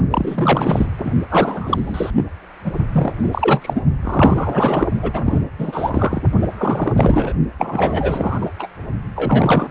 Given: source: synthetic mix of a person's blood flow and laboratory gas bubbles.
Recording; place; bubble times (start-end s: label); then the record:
Doppler ultrasound of blood flow; precordium
0.10-0.86 s: bubbles
0.98-1.12 s: bubbles
1.29-2.10 s: bubbles
2.15-2.25 s: bubbles
2.65-2.72 s: bubbles
2.92-3.81 s: bubbles
4.01-4.88 s: bubbles
5.02-5.42 s: bubbles
5.58-6.21 s: bubbles
6.42-6.46 s: bubbles
6.58-6.92 s: bubbles
6.96-7.33 s: bubbles
7.58-8.52 s: bubbles
8.59-8.69 s: bubbles
9.15-9.71 s: bubbles
From the record:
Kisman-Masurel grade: 343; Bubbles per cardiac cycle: rolling drumbeat, 9 or more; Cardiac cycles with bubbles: 100%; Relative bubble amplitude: loud (0.450 to 0.775); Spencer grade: 3 (all of the cardiac periods contain showers or single bubble signals, but not dominating or overriding the cardiac motion signals); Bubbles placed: only in the low amplitude regions of the cardiac cycle